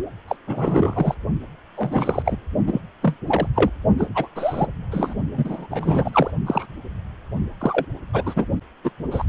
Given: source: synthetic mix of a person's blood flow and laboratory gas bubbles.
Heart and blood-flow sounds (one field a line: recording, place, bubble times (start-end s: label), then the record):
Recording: Doppler ultrasound of blood flow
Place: precordium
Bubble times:
0.28-0.36 s: bubbles
0.47-1.15 s: bubbles
1.77-2.23 s: bubbles
2.25-2.38 s: bubbles
2.67-2.81 s: bubbles
3.02-3.17 s: bubbles
3.27-3.47 s: bubbles
3.55-3.70 s: bubbles
3.98-4.08 s: bubbles
4.14-4.28 s: bubbles
4.36-4.67 s: bubbles
4.91-5.14 s: bubbles
5.33-5.67 s: bubbles
5.71-6.31 s: bubbles
6.46-6.66 s: bubbles
7.61-7.85 s: bubbles
8.13-8.23 s: bubbles
8.26-8.45 s: bubbles
8.84-8.90 s: bubbles
9.11-9.24 s: bubbles
From the record:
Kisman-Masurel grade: 242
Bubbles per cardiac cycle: several, 3 to 8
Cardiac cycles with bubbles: 100%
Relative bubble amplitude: moderate (0.250 to 0.450)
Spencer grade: 3 (all of the cardiac periods contain showers or single bubble signals, but not dominating or overriding the cardiac motion signals)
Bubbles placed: only in the low amplitude regions of the cardiac cycle